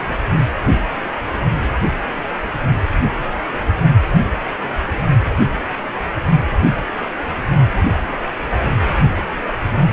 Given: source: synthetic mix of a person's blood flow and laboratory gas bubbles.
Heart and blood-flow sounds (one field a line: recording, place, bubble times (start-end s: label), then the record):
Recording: Doppler ultrasound of blood flow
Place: precordium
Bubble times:
no bubbles
From the record:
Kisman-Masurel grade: 000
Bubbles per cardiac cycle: 0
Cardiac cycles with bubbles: 0%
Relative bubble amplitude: no bubbles discernible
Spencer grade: 0 (complete lack of bubble signals)